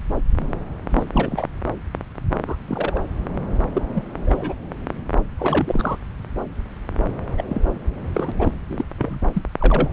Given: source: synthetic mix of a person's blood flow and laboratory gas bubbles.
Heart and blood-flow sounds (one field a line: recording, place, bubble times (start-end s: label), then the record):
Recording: Doppler ultrasound of blood flow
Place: subclavian vein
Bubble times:
0.90-1.06 s: bubbles
1.12-1.47 s: bubbles
2.47-2.56 s: bubbles
2.68-3.04 s: bubbles
3.58-3.63 s: bubbles
3.74-3.81 s: bubbles
3.94-4.02 s: bubbles
4.26-4.54 s: bubbles
5.39-5.97 s: bubbles
7.37-7.43 s: bubbles
7.49-7.62 s: bubbles
8.14-8.32 s: bubbles
8.38-8.53 s: bubbles
8.68-8.84 s: bubbles
8.98-9.20 s: bubbles
9.33-9.42 s: bubbles
9.59-9.91 s: bubbles
From the record:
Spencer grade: 3 (all of the cardiac periods contain showers or single bubble signals, but not dominating or overriding the cardiac motion signals)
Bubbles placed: anywhere in the cardiac cycle